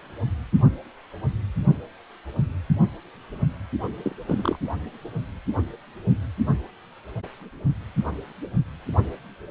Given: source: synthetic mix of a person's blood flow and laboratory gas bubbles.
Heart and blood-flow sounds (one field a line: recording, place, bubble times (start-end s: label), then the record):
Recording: Doppler ultrasound of blood flow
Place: precordium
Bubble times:
4.02-4.15 s: bubbles
4.26-4.57 s: bubbles
From the record:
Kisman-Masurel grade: 221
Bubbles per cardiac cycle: several, 3 to 8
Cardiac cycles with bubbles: 10 to 50%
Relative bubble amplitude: barely perceptible (0.100 to 0.250)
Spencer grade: 2 (many but less than half of the cardiac periods contain bubble signals, singularly or in groups)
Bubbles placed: only in the low amplitude regions of the cardiac cycle